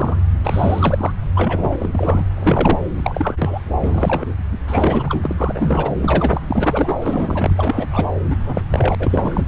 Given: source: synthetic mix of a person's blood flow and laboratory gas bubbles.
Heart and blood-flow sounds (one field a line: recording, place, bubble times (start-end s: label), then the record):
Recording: Doppler ultrasound of blood flow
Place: subclavian vein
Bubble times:
0.00-0.16 s: bubbles
0.44-1.11 s: bubbles
1.35-2.25 s: bubbles
2.36-2.79 s: bubbles
2.96-3.58 s: bubbles
3.80-4.34 s: bubbles
4.51-4.58 s: bubbles
4.67-5.33 s: bubbles
5.37-5.94 s: bubbles
6.01-6.41 s: bubbles
6.48-6.96 s: bubbles
7.01-8.06 s: bubbles
8.30-8.36 s: bubbles
8.39-8.67 s: bubbles
8.71-8.95 s: bubbles
8.99-9.46 s: bubbles
From the record:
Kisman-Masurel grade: 343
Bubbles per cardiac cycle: rolling drumbeat, 9 or more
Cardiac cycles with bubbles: 100%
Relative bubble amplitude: loud (0.450 to 0.775)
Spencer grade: 3 (all of the cardiac periods contain showers or single bubble signals, but not dominating or overriding the cardiac motion signals)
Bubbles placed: anywhere in the cardiac cycle